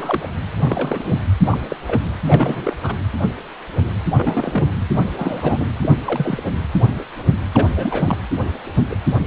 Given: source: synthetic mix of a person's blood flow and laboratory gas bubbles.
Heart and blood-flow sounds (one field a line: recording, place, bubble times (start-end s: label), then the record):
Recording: Doppler ultrasound of blood flow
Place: precordium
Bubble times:
0.00-0.29 s: bubbles
0.59-1.17 s: bubbles
1.50-1.60 s: bubbles
1.69-1.77 s: bubbles
1.86-2.02 s: bubbles
2.26-2.77 s: bubbles
2.82-2.94 s: bubbles
4.16-4.68 s: bubbles
5.13-5.70 s: bubbles
5.82-5.90 s: bubbles
6.07-6.41 s: bubbles
7.54-7.67 s: bubbles
7.76-8.18 s: bubbles
8.89-8.96 s: bubbles
From the record:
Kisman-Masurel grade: 232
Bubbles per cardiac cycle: several, 3 to 8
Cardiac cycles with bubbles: 50 to 99%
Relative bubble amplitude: moderate (0.250 to 0.450)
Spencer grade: 3 (all of the cardiac periods contain showers or single bubble signals, but not dominating or overriding the cardiac motion signals)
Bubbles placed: anywhere in the cardiac cycle